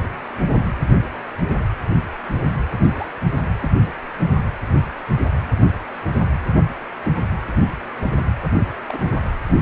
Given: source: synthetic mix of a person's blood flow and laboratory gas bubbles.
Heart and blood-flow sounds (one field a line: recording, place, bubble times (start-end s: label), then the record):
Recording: Doppler ultrasound of blood flow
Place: precordium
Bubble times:
2.83-3.11 s: bubbles
3.60-3.69 s: bubbles
7.04-7.12 s: bubbles
8.88-9.20 s: bubbles
From the record:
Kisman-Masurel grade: 121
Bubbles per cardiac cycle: 1 to 2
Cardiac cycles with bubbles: 10 to 50%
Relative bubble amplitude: barely perceptible (0.100 to 0.250)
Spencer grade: 2 (many but less than half of the cardiac periods contain bubble signals, singularly or in groups)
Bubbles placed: anywhere in the cardiac cycle